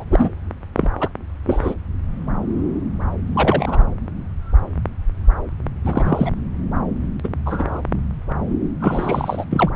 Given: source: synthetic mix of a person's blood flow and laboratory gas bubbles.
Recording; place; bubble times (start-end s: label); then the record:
Doppler ultrasound of blood flow; subclavian vein
0.00-0.04 s: bubbles
0.10-0.29 s: bubbles
0.77-0.91 s: bubbles
1.00-1.09 s: bubbles
1.46-1.74 s: bubbles
3.35-3.86 s: bubbles
5.84-6.31 s: bubbles
7.23-7.28 s: bubbles
7.45-7.81 s: bubbles
8.80-9.45 s: bubbles
9.50-9.70 s: bubbles
From the record:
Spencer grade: 3 (all of the cardiac periods contain showers or single bubble signals, but not dominating or overriding the cardiac motion signals); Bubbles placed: anywhere in the cardiac cycle